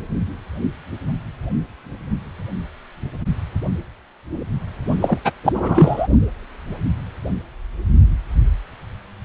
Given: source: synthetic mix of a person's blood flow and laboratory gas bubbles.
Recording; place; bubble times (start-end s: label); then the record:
Doppler ultrasound of blood flow; precordium
5.00-5.18 s: bubbles
5.25-5.32 s: bubbles
5.43-6.07 s: bubbles
From the record:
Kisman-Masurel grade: 223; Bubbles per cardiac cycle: several, 3 to 8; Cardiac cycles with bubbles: 10 to 50%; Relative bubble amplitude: loud (0.450 to 0.775); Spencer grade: 2 (many but less than half of the cardiac periods contain bubble signals, singularly or in groups); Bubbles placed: only in the low amplitude regions of the cardiac cycle